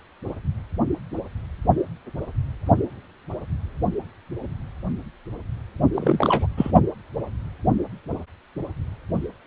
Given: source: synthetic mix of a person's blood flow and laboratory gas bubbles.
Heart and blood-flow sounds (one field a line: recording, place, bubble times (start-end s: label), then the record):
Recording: Doppler ultrasound of blood flow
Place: precordium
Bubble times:
5.94-6.46 s: bubbles
6.57-6.71 s: bubbles
From the record:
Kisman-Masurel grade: 213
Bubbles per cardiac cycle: several, 3 to 8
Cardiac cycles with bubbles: 1 to 10%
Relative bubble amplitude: loud (0.450 to 0.775)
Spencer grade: 1 (occasional bubble signal discernible with the cardiac motion signal, with majority of cardiac periods free of bubbles)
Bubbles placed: only in the low amplitude regions of the cardiac cycle